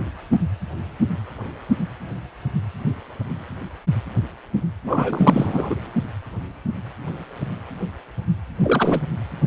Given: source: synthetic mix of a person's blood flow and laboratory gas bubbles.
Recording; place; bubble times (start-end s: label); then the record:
Doppler ultrasound of blood flow; precordium
4.83-5.76 s: bubbles
8.63-9.01 s: bubbles
From the record:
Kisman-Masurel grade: 223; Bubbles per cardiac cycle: several, 3 to 8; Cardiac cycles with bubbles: 10 to 50%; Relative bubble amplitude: loud (0.450 to 0.775); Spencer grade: 2 (many but less than half of the cardiac periods contain bubble signals, singularly or in groups); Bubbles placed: anywhere in the cardiac cycle